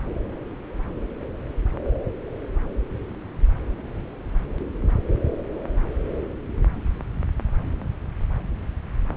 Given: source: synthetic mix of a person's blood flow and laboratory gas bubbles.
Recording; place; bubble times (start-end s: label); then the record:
Doppler ultrasound of blood flow; subclavian vein
no bubbles
From the record:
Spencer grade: 0 (complete lack of bubble signals)